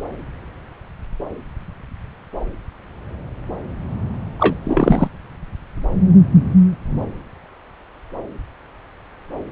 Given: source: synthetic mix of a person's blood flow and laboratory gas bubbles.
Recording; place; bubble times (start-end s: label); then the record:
Doppler ultrasound of blood flow; subclavian vein
4.40-4.55 s: bubbles
4.65-5.08 s: bubbles
From the record:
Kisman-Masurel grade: 213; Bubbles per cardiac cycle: several, 3 to 8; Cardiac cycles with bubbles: 1 to 10%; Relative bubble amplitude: loud (0.450 to 0.775); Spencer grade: 1 (occasional bubble signal discernible with the cardiac motion signal, with majority of cardiac periods free of bubbles); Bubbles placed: anywhere in the cardiac cycle